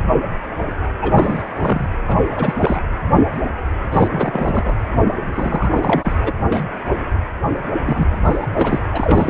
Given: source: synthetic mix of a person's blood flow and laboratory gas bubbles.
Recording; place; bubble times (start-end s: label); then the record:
Doppler ultrasound of blood flow; precordium
1.02-1.43 s: bubbles
1.52-1.90 s: bubbles
2.07-2.17 s: bubbles
2.31-2.83 s: bubbles
3.92-4.08 s: bubbles
4.10-4.75 s: bubbles
5.35-6.12 s: bubbles
6.22-6.33 s: bubbles
6.49-6.67 s: bubbles
7.85-8.09 s: bubbles
8.11-8.47 s: bubbles
8.57-8.81 s: bubbles
8.92-9.30 s: bubbles
From the record:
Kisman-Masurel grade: 332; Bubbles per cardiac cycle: rolling drumbeat, 9 or more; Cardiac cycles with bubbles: 50 to 99%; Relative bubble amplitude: moderate (0.250 to 0.450); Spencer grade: 3 (all of the cardiac periods contain showers or single bubble signals, but not dominating or overriding the cardiac motion signals); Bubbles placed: anywhere in the cardiac cycle